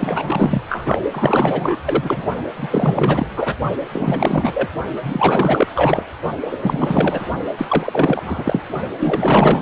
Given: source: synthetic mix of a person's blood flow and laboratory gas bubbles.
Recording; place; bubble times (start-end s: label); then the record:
Doppler ultrasound of blood flow; precordium
0.00-0.62 s: bubbles
0.68-0.99 s: bubbles
1.11-1.77 s: bubbles
1.85-2.27 s: bubbles
2.56-3.27 s: bubbles
3.35-3.54 s: bubbles
3.92-4.69 s: bubbles
5.03-5.67 s: bubbles
5.75-6.03 s: bubbles
6.46-6.58 s: bubbles
6.62-7.27 s: bubbles
7.58-8.60 s: bubbles
8.99-9.62 s: bubbles
From the record:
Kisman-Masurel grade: 444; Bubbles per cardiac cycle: continuous sound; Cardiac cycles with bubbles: 100%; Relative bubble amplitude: maximal (0.775 to 0.999); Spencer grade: 4 (maximum detectable bubble signal sounding continuously throughout systole and diastole of every cardiac period, and overriding the amplitude of the normal cardiac signals); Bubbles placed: only in the low amplitude regions of the cardiac cycle